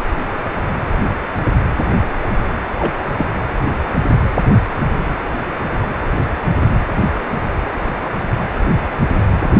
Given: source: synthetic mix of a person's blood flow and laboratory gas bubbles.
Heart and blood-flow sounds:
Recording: Doppler ultrasound of blood flow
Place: precordium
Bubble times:
2.79-2.94 s: bubbles
3.17-3.26 s: bubbles
From the record:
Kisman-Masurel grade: 112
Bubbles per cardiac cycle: 1 to 2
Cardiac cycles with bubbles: 1 to 10%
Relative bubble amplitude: moderate (0.250 to 0.450)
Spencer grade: 1 (occasional bubble signal discernible with the cardiac motion signal, with majority of cardiac periods free of bubbles)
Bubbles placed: anywhere in the cardiac cycle

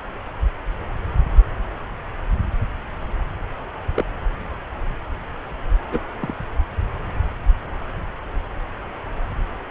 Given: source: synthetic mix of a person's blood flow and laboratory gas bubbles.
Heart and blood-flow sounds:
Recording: Doppler ultrasound of blood flow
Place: subclavian vein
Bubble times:
3.96-4.04 s: bubbles
5.92-5.99 s: bubbles
6.21-6.33 s: bubbles
From the record:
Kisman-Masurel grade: 122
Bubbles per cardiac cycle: 1 to 2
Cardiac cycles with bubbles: 10 to 50%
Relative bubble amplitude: moderate (0.250 to 0.450)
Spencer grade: 2 (many but less than half of the cardiac periods contain bubble signals, singularly or in groups)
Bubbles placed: anywhere in the cardiac cycle

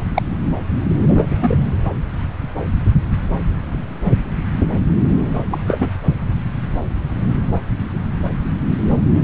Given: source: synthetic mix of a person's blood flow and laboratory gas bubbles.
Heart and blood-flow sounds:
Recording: Doppler ultrasound of blood flow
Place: subclavian vein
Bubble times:
0.00-0.03 s: bubbles
0.14-0.22 s: bubbles
1.08-1.57 s: bubbles
5.50-5.91 s: bubbles
From the record:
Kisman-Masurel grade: 222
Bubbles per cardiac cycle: several, 3 to 8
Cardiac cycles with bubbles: 10 to 50%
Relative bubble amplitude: moderate (0.250 to 0.450)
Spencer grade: 2 (many but less than half of the cardiac periods contain bubble signals, singularly or in groups)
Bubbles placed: anywhere in the cardiac cycle

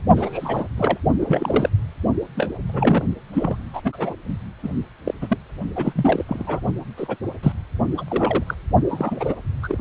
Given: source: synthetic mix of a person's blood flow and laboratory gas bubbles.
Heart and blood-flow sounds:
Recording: Doppler ultrasound of blood flow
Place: precordium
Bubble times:
0.16-0.67 s: bubbles
0.77-0.99 s: bubbles
1.20-1.70 s: bubbles
2.34-2.49 s: bubbles
2.69-3.03 s: bubbles
3.33-3.62 s: bubbles
3.73-3.81 s: bubbles
3.84-4.16 s: bubbles
4.63-4.69 s: bubbles
5.06-5.14 s: bubbles
5.21-5.38 s: bubbles
5.75-6.25 s: bubbles
6.29-6.60 s: bubbles
6.97-7.17 s: bubbles
7.43-7.52 s: bubbles
7.97-8.04 s: bubbles
8.08-8.43 s: bubbles
8.46-8.54 s: bubbles
8.88-9.34 s: bubbles
9.62-9.78 s: bubbles
From the record:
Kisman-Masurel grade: 242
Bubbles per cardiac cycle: several, 3 to 8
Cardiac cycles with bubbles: 100%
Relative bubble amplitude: moderate (0.250 to 0.450)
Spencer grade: 3 (all of the cardiac periods contain showers or single bubble signals, but not dominating or overriding the cardiac motion signals)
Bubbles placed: only in the low amplitude regions of the cardiac cycle

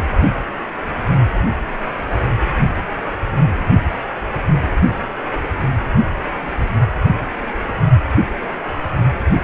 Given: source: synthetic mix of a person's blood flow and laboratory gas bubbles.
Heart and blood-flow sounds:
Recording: Doppler ultrasound of blood flow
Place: precordium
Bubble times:
no bubbles
From the record:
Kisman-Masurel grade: 000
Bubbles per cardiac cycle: 0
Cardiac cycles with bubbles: 0%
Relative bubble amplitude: no bubbles discernible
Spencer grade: 0 (complete lack of bubble signals)

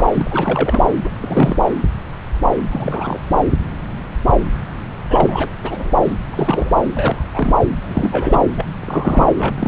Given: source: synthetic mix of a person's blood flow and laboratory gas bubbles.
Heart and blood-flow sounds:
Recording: Doppler ultrasound of blood flow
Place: subclavian vein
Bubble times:
0.00-0.05 s: bubbles
0.12-0.86 s: bubbles
1.03-1.09 s: bubbles
1.20-1.59 s: bubbles
2.70-3.20 s: bubbles
3.31-3.42 s: bubbles
5.08-5.50 s: bubbles
5.63-5.90 s: bubbles
6.04-6.12 s: bubbles
6.32-6.71 s: bubbles
6.94-7.24 s: bubbles
7.34-7.54 s: bubbles
7.82-8.41 s: bubbles
8.55-8.65 s: bubbles
8.81-9.68 s: bubbles
From the record:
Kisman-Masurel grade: 332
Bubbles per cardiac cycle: rolling drumbeat, 9 or more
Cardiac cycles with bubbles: 50 to 99%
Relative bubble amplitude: moderate (0.250 to 0.450)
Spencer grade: 3 (all of the cardiac periods contain showers or single bubble signals, but not dominating or overriding the cardiac motion signals)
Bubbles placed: anywhere in the cardiac cycle

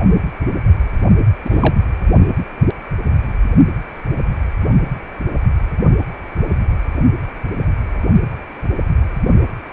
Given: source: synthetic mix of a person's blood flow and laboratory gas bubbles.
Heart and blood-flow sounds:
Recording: Doppler ultrasound of blood flow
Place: precordium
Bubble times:
1.45-1.75 s: bubbles
From the record:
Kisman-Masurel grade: 213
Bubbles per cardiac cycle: several, 3 to 8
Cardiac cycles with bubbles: 1 to 10%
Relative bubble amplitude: loud (0.450 to 0.775)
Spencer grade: 1 (occasional bubble signal discernible with the cardiac motion signal, with majority of cardiac periods free of bubbles)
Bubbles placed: only in the low amplitude regions of the cardiac cycle

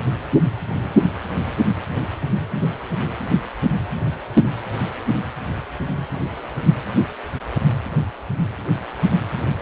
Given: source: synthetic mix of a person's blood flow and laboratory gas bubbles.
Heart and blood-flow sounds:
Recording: Doppler ultrasound of blood flow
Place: precordium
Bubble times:
no bubbles
From the record:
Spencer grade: 0 (complete lack of bubble signals)

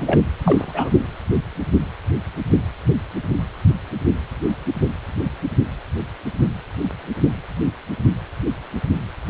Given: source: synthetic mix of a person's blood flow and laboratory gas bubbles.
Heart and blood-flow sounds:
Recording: Doppler ultrasound of blood flow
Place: precordium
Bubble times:
0.00-0.23 s: bubbles
0.44-0.90 s: bubbles
From the record:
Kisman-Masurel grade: 212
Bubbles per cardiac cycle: several, 3 to 8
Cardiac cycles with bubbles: 1 to 10%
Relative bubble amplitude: moderate (0.250 to 0.450)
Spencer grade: 1 (occasional bubble signal discernible with the cardiac motion signal, with majority of cardiac periods free of bubbles)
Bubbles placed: only in the low amplitude regions of the cardiac cycle

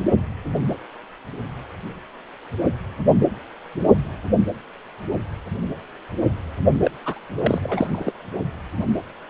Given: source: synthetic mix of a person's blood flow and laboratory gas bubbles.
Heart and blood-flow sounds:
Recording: Doppler ultrasound of blood flow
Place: precordium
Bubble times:
6.83-6.91 s: bubbles
7.04-7.19 s: bubbles
7.45-7.60 s: bubbles
7.64-7.88 s: bubbles
7.93-8.12 s: bubbles
From the record:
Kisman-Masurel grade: 212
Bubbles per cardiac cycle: several, 3 to 8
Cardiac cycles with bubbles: 1 to 10%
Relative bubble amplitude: moderate (0.250 to 0.450)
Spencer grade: 1 (occasional bubble signal discernible with the cardiac motion signal, with majority of cardiac periods free of bubbles)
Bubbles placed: only in the low amplitude regions of the cardiac cycle

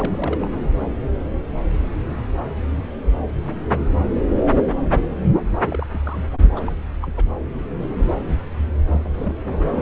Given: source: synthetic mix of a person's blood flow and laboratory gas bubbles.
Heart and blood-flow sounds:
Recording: Doppler ultrasound of blood flow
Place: subclavian vein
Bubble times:
0.00-0.49 s: bubbles
5.68-5.87 s: bubbles
5.89-6.24 s: bubbles
6.43-6.50 s: bubbles
6.56-6.72 s: bubbles
7.02-7.12 s: bubbles
7.17-7.24 s: bubbles
8.87-9.09 s: bubbles
9.14-9.34 s: bubbles
9.69-9.82 s: bubbles
From the record:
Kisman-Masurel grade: 221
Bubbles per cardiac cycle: several, 3 to 8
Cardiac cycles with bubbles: 10 to 50%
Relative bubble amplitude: barely perceptible (0.100 to 0.250)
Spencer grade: 2 (many but less than half of the cardiac periods contain bubble signals, singularly or in groups)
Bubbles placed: anywhere in the cardiac cycle

